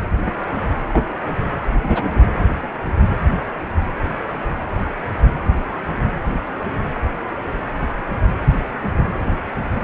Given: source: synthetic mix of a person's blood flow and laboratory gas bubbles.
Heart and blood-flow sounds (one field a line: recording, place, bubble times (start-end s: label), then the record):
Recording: Doppler ultrasound of blood flow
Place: precordium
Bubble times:
0.88-1.00 s: bubbles
1.82-2.20 s: bubbles
From the record:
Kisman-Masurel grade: 122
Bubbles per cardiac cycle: 1 to 2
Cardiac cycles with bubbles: 10 to 50%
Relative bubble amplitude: moderate (0.250 to 0.450)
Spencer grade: 2 (many but less than half of the cardiac periods contain bubble signals, singularly or in groups)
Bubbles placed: anywhere in the cardiac cycle